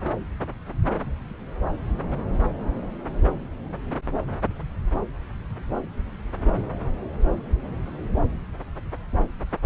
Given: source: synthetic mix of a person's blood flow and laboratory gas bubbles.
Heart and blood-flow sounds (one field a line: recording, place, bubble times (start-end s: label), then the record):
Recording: Doppler ultrasound of blood flow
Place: subclavian vein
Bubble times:
no bubbles
From the record:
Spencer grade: 0 (complete lack of bubble signals)